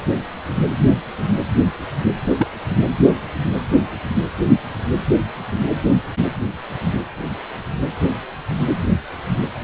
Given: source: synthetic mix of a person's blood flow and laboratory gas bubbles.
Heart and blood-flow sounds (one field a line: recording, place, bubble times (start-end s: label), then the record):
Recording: Doppler ultrasound of blood flow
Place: precordium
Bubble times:
2.27-2.32 s: bubbles
2.36-2.47 s: bubbles
From the record:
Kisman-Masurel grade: 112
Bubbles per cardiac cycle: 1 to 2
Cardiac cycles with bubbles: 1 to 10%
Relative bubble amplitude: moderate (0.250 to 0.450)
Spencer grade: 1 (occasional bubble signal discernible with the cardiac motion signal, with majority of cardiac periods free of bubbles)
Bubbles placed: anywhere in the cardiac cycle